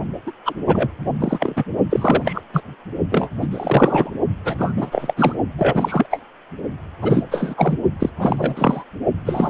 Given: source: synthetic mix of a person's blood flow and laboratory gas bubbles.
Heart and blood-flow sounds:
Doppler ultrasound of blood flow; precordium
0.26-0.32 s: bubbles
0.45-0.55 s: bubbles
0.67-0.90 s: bubbles
1.20-1.65 s: bubbles
1.90-2.41 s: bubbles
2.52-2.62 s: bubbles
3.10-3.29 s: bubbles
3.41-3.48 s: bubbles
3.51-4.10 s: bubbles
4.44-4.72 s: bubbles
4.76-5.35 s: bubbles
5.58-6.06 s: bubbles
6.10-6.21 s: bubbles
7.01-7.25 s: bubbles
7.30-7.78 s: bubbles
8.00-8.11 s: bubbles
8.19-8.84 s: bubbles
9.26-9.50 s: bubbles
From the record:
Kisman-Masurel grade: 343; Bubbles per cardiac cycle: rolling drumbeat, 9 or more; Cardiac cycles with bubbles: 100%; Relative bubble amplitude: loud (0.450 to 0.775); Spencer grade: 3 (all of the cardiac periods contain showers or single bubble signals, but not dominating or overriding the cardiac motion signals); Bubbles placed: only in the low amplitude regions of the cardiac cycle

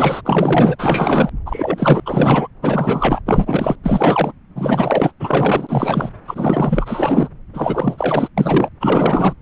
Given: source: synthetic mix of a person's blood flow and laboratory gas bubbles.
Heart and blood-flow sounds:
Doppler ultrasound of blood flow; subclavian vein
0.00-0.22 s: bubbles
0.24-0.76 s: bubbles
0.78-1.29 s: bubbles
1.46-2.00 s: bubbles
2.06-2.48 s: bubbles
2.62-3.21 s: bubbles
3.25-3.75 s: bubbles
3.83-4.33 s: bubbles
4.55-5.12 s: bubbles
5.20-6.11 s: bubbles
6.27-7.29 s: bubbles
7.54-8.28 s: bubbles
8.37-8.69 s: bubbles
8.80-9.34 s: bubbles
From the record:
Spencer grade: 4 (maximum detectable bubble signal sounding continuously throughout systole and diastole of every cardiac period, and overriding the amplitude of the normal cardiac signals); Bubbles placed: anywhere in the cardiac cycle

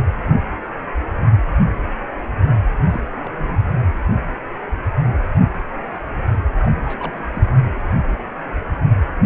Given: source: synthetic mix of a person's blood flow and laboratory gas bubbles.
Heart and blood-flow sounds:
Doppler ultrasound of blood flow; precordium
2.90-3.01 s: bubbles
3.19-3.58 s: bubbles
3.72-3.85 s: bubbles
6.59-6.73 s: bubbles
6.81-7.23 s: bubbles
7.26-7.45 s: bubbles
From the record:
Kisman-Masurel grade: 221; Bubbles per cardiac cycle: several, 3 to 8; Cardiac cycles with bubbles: 10 to 50%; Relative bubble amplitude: barely perceptible (0.100 to 0.250); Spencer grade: 2 (many but less than half of the cardiac periods contain bubble signals, singularly or in groups); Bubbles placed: anywhere in the cardiac cycle

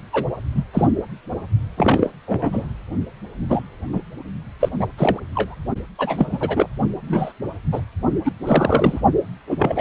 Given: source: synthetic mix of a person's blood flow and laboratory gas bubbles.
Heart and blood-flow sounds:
Doppler ultrasound of blood flow; precordium
0.12-0.26 s: bubbles
0.55-0.64 s: bubbles
0.73-0.85 s: bubbles
1.77-2.10 s: bubbles
2.27-2.67 s: bubbles
3.48-3.62 s: bubbles
3.92-4.01 s: bubbles
4.60-4.69 s: bubbles
4.78-4.88 s: bubbles
4.97-5.20 s: bubbles
5.33-5.55 s: bubbles
5.98-6.70 s: bubbles
7.08-7.33 s: bubbles
7.72-7.81 s: bubbles
8.24-8.32 s: bubbles
8.46-9.01 s: bubbles
9.48-9.81 s: bubbles
From the record:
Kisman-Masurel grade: 243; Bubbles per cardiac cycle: several, 3 to 8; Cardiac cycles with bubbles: 100%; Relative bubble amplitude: loud (0.450 to 0.775); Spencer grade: 3 (all of the cardiac periods contain showers or single bubble signals, but not dominating or overriding the cardiac motion signals); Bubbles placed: only in the low amplitude regions of the cardiac cycle

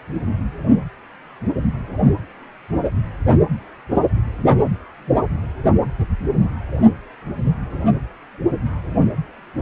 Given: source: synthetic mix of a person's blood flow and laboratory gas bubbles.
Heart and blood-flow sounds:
Doppler ultrasound of blood flow; precordium
no bubbles
From the record:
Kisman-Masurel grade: 000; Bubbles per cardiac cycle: 0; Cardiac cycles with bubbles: 0%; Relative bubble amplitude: no bubbles discernible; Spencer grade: 0 (complete lack of bubble signals)

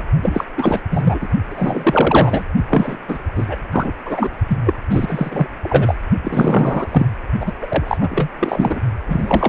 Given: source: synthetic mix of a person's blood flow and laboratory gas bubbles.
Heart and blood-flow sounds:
Doppler ultrasound of blood flow; precordium
0.00-0.02 s: bubbles
0.22-0.44 s: bubbles
0.57-0.80 s: bubbles
0.90-1.29 s: bubbles
1.50-2.46 s: bubbles
2.70-2.96 s: bubbles
3.08-3.19 s: bubbles
3.35-3.58 s: bubbles
3.71-3.91 s: bubbles
4.05-4.30 s: bubbles
4.48-4.58 s: bubbles
4.64-4.73 s: bubbles
4.90-5.46 s: bubbles
5.63-5.94 s: bubbles
6.23-7.08 s: bubbles
7.40-7.53 s: bubbles
7.61-7.97 s: bubbles
8.00-8.29 s: bubbles
8.39-8.79 s: bubbles
9.07-9.49 s: bubbles
From the record:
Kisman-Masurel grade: 444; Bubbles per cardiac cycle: continuous sound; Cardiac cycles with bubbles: 100%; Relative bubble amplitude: maximal (0.775 to 0.999); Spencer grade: 4 (maximum detectable bubble signal sounding continuously throughout systole and diastole of every cardiac period, and overriding the amplitude of the normal cardiac signals); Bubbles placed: only in the low amplitude regions of the cardiac cycle

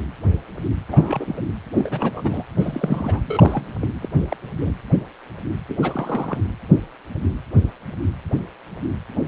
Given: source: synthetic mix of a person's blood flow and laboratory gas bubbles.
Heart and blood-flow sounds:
Doppler ultrasound of blood flow; precordium
0.88-1.41 s: bubbles
1.76-2.43 s: bubbles
2.59-3.20 s: bubbles
3.27-3.69 s: bubbles
3.80-3.88 s: bubbles
4.01-4.09 s: bubbles
4.29-4.37 s: bubbles
4.60-4.71 s: bubbles
5.68-5.77 s: bubbles
5.81-6.40 s: bubbles
From the record:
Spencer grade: 3 (all of the cardiac periods contain showers or single bubble signals, but not dominating or overriding the cardiac motion signals); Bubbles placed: anywhere in the cardiac cycle

